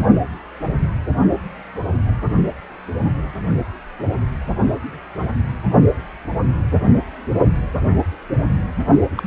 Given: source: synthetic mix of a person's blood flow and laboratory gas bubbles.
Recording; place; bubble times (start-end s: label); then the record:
Doppler ultrasound of blood flow; precordium
9.15-9.27 s: bubbles
From the record:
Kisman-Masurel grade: 222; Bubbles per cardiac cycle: several, 3 to 8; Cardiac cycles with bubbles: 10 to 50%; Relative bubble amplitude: moderate (0.250 to 0.450); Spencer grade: 2 (many but less than half of the cardiac periods contain bubble signals, singularly or in groups); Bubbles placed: only in the low amplitude regions of the cardiac cycle